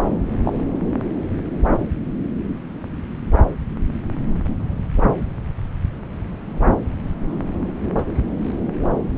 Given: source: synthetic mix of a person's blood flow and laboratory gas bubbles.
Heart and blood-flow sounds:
Doppler ultrasound of blood flow; subclavian vein
0.45-0.63 s: bubbles
From the record:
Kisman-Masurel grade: 112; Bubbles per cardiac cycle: 1 to 2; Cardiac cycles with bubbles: 1 to 10%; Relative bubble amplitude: moderate (0.250 to 0.450); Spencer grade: 1 (occasional bubble signal discernible with the cardiac motion signal, with majority of cardiac periods free of bubbles); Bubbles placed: anywhere in the cardiac cycle

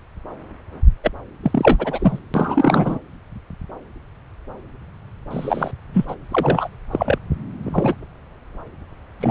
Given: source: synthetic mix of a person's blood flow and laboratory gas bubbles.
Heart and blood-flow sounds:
Doppler ultrasound of blood flow; subclavian vein
1.03-1.11 s: bubbles
1.43-2.19 s: bubbles
2.34-2.98 s: bubbles
5.31-5.72 s: bubbles
5.93-6.05 s: bubbles
6.08-6.16 s: bubbles
6.31-6.78 s: bubbles
6.91-7.18 s: bubbles
7.63-7.96 s: bubbles
9.20-9.31 s: bubbles
From the record:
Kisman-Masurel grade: 233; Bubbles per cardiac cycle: several, 3 to 8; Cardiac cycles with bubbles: 50 to 99%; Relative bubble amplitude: loud (0.450 to 0.775); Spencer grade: 3 (all of the cardiac periods contain showers or single bubble signals, but not dominating or overriding the cardiac motion signals); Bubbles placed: anywhere in the cardiac cycle

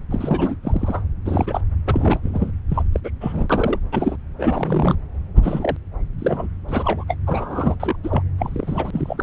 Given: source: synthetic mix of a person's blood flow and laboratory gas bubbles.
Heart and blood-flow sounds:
Doppler ultrasound of blood flow; subclavian vein
0.10-0.55 s: bubbles
0.62-1.03 s: bubbles
1.25-1.60 s: bubbles
1.85-2.20 s: bubbles
2.22-2.52 s: bubbles
2.69-2.84 s: bubbles
2.92-3.00 s: bubbles
3.04-3.10 s: bubbles
3.21-3.79 s: bubbles
3.92-4.16 s: bubbles
4.38-4.96 s: bubbles
5.42-5.76 s: bubbles
6.18-6.49 s: bubbles
6.68-7.04 s: bubbles
7.07-7.15 s: bubbles
7.26-7.76 s: bubbles
7.79-7.96 s: bubbles
8.03-8.22 s: bubbles
8.38-9.23 s: bubbles
From the record:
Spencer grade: 3 (all of the cardiac periods contain showers or single bubble signals, but not dominating or overriding the cardiac motion signals); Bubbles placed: anywhere in the cardiac cycle

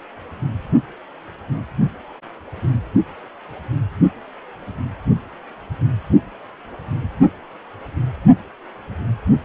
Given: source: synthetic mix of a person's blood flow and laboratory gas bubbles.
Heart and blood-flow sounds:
Doppler ultrasound of blood flow; precordium
no bubbles
From the record:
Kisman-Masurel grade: 000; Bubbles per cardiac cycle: 0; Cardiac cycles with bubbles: 0%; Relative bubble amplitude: no bubbles discernible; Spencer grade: 0 (complete lack of bubble signals)

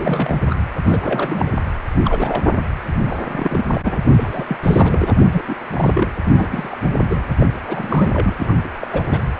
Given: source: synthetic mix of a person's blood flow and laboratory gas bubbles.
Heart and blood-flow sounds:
Doppler ultrasound of blood flow; precordium
0.00-0.41 s: bubbles
0.49-0.55 s: bubbles
0.84-1.52 s: bubbles
2.04-2.60 s: bubbles
3.04-3.65 s: bubbles
3.72-3.81 s: bubbles
3.84-3.97 s: bubbles
4.10-4.56 s: bubbles
4.62-5.12 s: bubbles
5.18-5.26 s: bubbles
5.29-5.42 s: bubbles
5.47-5.56 s: bubbles
5.73-6.07 s: bubbles
6.35-6.76 s: bubbles
7.09-7.22 s: bubbles
7.38-7.46 s: bubbles
7.67-8.34 s: bubbles
8.38-8.54 s: bubbles
8.64-8.68 s: bubbles
8.79-8.88 s: bubbles
8.92-9.04 s: bubbles
9.06-9.21 s: bubbles
From the record:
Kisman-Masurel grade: 342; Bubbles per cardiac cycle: rolling drumbeat, 9 or more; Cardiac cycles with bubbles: 100%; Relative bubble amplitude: moderate (0.250 to 0.450); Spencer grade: 3 (all of the cardiac periods contain showers or single bubble signals, but not dominating or overriding the cardiac motion signals); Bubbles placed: anywhere in the cardiac cycle

